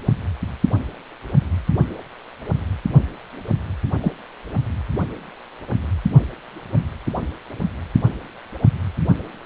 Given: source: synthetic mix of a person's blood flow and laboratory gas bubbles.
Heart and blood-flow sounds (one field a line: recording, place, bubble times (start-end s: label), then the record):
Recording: Doppler ultrasound of blood flow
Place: precordium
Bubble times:
4.00-4.11 s: bubbles
From the record:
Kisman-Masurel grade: 112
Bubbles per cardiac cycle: 1 to 2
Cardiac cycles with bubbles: 1 to 10%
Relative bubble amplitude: moderate (0.250 to 0.450)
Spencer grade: 1 (occasional bubble signal discernible with the cardiac motion signal, with majority of cardiac periods free of bubbles)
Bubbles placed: only in the low amplitude regions of the cardiac cycle